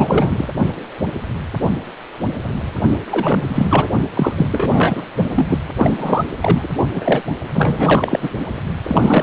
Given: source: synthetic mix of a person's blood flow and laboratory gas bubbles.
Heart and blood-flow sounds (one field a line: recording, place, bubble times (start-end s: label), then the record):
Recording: Doppler ultrasound of blood flow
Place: precordium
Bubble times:
0.00-0.49 s: bubbles
3.11-3.88 s: bubbles
4.13-4.33 s: bubbles
4.36-4.47 s: bubbles
4.50-5.03 s: bubbles
5.36-5.58 s: bubbles
5.76-6.25 s: bubbles
6.42-6.68 s: bubbles
6.92-7.21 s: bubbles
7.54-8.30 s: bubbles
8.88-9.23 s: bubbles
From the record:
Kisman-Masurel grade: 333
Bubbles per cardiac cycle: rolling drumbeat, 9 or more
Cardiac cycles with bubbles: 50 to 99%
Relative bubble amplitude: loud (0.450 to 0.775)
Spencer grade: 3 (all of the cardiac periods contain showers or single bubble signals, but not dominating or overriding the cardiac motion signals)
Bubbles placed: only in the low amplitude regions of the cardiac cycle